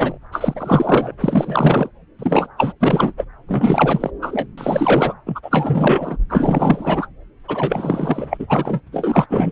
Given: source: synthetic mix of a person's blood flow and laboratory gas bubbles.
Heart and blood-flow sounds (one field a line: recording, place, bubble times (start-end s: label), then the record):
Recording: Doppler ultrasound of blood flow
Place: subclavian vein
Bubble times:
0.00-0.18 s: bubbles
0.32-1.11 s: bubbles
1.20-1.89 s: bubbles
2.19-2.47 s: bubbles
2.57-2.73 s: bubbles
2.79-3.13 s: bubbles
3.17-3.24 s: bubbles
3.47-4.10 s: bubbles
4.21-4.46 s: bubbles
4.58-5.14 s: bubbles
5.26-6.17 s: bubbles
6.29-7.08 s: bubbles
7.48-8.81 s: bubbles
8.87-8.89 s: bubbles
8.91-9.26 s: bubbles
9.29-9.52 s: bubbles
From the record:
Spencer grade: 4 (maximum detectable bubble signal sounding continuously throughout systole and diastole of every cardiac period, and overriding the amplitude of the normal cardiac signals)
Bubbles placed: anywhere in the cardiac cycle